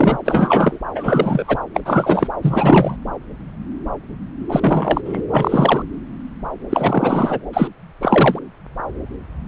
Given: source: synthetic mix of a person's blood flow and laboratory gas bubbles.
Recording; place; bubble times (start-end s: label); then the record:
Doppler ultrasound of blood flow; subclavian vein
0.00-0.18 s: bubbles
0.25-0.79 s: bubbles
0.95-1.58 s: bubbles
1.74-1.80 s: bubbles
1.85-2.28 s: bubbles
2.42-2.96 s: bubbles
4.49-5.01 s: bubbles
5.05-5.21 s: bubbles
5.29-5.83 s: bubbles
6.70-7.39 s: bubbles
7.53-7.67 s: bubbles
8.01-8.39 s: bubbles
From the record:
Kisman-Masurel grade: 333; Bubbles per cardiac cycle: rolling drumbeat, 9 or more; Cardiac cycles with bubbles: 50 to 99%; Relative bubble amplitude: loud (0.450 to 0.775); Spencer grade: 3 (all of the cardiac periods contain showers or single bubble signals, but not dominating or overriding the cardiac motion signals); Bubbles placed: anywhere in the cardiac cycle